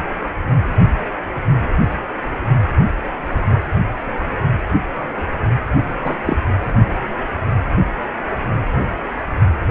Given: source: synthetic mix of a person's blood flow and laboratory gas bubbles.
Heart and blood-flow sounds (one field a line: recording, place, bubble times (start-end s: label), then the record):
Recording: Doppler ultrasound of blood flow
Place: precordium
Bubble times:
6.03-6.16 s: bubbles
6.25-6.37 s: bubbles
From the record:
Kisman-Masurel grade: 112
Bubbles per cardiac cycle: 1 to 2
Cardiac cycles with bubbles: 1 to 10%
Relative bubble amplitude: moderate (0.250 to 0.450)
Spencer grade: 1 (occasional bubble signal discernible with the cardiac motion signal, with majority of cardiac periods free of bubbles)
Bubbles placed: only in the low amplitude regions of the cardiac cycle